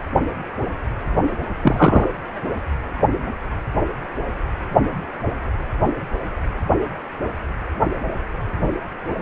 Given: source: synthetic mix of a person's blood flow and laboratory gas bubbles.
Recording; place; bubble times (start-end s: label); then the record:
Doppler ultrasound of blood flow; precordium
1.62-2.08 s: bubbles
From the record:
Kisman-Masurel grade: 113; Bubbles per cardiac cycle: 1 to 2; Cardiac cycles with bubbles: 1 to 10%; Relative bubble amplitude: loud (0.450 to 0.775); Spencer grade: 1 (occasional bubble signal discernible with the cardiac motion signal, with majority of cardiac periods free of bubbles); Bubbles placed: anywhere in the cardiac cycle